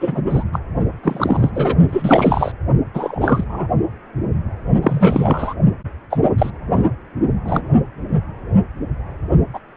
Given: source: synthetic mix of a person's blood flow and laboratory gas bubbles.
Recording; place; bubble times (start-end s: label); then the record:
Doppler ultrasound of blood flow; precordium
0.00-0.22 s: bubbles
0.29-0.43 s: bubbles
0.53-0.59 s: bubbles
1.03-1.51 s: bubbles
1.54-1.77 s: bubbles
1.88-2.52 s: bubbles
2.94-3.44 s: bubbles
3.50-3.67 s: bubbles
4.82-5.55 s: bubbles
6.11-6.18 s: bubbles
6.23-6.29 s: bubbles
6.38-6.50 s: bubbles
7.44-7.62 s: bubbles
9.54-9.59 s: bubbles
From the record:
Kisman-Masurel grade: 233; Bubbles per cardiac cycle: several, 3 to 8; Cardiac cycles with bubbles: 50 to 99%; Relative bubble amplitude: loud (0.450 to 0.775); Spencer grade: 3 (all of the cardiac periods contain showers or single bubble signals, but not dominating or overriding the cardiac motion signals); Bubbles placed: only in the low amplitude regions of the cardiac cycle